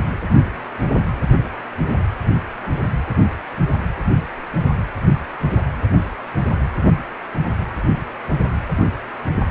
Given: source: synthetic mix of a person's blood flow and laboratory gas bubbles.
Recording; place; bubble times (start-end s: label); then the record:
Doppler ultrasound of blood flow; precordium
no bubbles
From the record:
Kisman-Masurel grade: 000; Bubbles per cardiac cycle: 0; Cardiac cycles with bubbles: 0%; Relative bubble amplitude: no bubbles discernible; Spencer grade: 0 (complete lack of bubble signals)